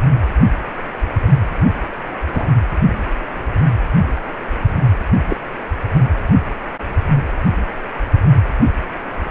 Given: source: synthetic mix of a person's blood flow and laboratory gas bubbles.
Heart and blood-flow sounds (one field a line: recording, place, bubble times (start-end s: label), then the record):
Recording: Doppler ultrasound of blood flow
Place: precordium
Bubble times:
2.33-2.46 s: bubbles
5.29-5.37 s: bubbles
From the record:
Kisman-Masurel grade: 123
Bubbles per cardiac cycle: 1 to 2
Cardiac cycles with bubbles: 10 to 50%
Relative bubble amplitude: loud (0.450 to 0.775)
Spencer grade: 2 (many but less than half of the cardiac periods contain bubble signals, singularly or in groups)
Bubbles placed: anywhere in the cardiac cycle